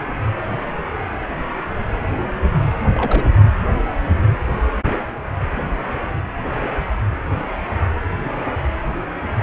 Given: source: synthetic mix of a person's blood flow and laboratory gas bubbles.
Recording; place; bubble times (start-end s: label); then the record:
Doppler ultrasound of blood flow; precordium
2.92-3.33 s: bubbles
From the record:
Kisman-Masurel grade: 122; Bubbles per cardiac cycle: 1 to 2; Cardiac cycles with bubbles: 10 to 50%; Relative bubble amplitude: moderate (0.250 to 0.450); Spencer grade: 2 (many but less than half of the cardiac periods contain bubble signals, singularly or in groups); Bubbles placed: anywhere in the cardiac cycle